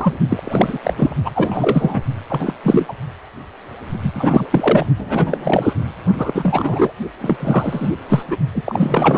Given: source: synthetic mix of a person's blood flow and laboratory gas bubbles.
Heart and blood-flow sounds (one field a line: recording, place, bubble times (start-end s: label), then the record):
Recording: Doppler ultrasound of blood flow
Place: precordium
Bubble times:
0.00-0.19 s: bubbles
0.29-0.78 s: bubbles
0.83-0.94 s: bubbles
0.98-1.15 s: bubbles
1.24-2.02 s: bubbles
2.27-2.54 s: bubbles
2.63-2.94 s: bubbles
4.03-4.46 s: bubbles
4.51-4.86 s: bubbles
4.97-5.73 s: bubbles
6.18-6.92 s: bubbles
7.19-7.88 s: bubbles
8.09-8.23 s: bubbles
8.28-8.36 s: bubbles
8.54-8.63 s: bubbles
8.65-9.18 s: bubbles
From the record:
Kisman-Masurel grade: 333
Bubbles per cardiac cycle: rolling drumbeat, 9 or more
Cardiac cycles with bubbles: 50 to 99%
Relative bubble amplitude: loud (0.450 to 0.775)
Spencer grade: 3 (all of the cardiac periods contain showers or single bubble signals, but not dominating or overriding the cardiac motion signals)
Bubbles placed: only in the low amplitude regions of the cardiac cycle